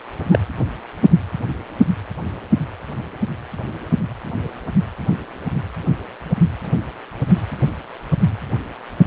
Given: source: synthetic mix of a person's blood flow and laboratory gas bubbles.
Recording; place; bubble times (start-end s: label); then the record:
Doppler ultrasound of blood flow; precordium
0.30-0.39 s: bubbles
From the record:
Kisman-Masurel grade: 113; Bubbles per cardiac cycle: 1 to 2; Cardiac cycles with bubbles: 1 to 10%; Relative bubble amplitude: loud (0.450 to 0.775); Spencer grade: 1 (occasional bubble signal discernible with the cardiac motion signal, with majority of cardiac periods free of bubbles); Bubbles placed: anywhere in the cardiac cycle